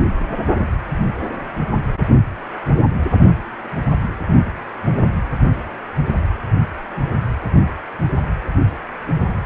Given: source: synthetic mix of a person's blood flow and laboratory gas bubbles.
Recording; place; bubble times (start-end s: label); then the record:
Doppler ultrasound of blood flow; precordium
no bubbles
From the record:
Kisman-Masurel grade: 000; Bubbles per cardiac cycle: 0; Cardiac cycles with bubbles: 0%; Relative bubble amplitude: no bubbles discernible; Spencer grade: 0 (complete lack of bubble signals)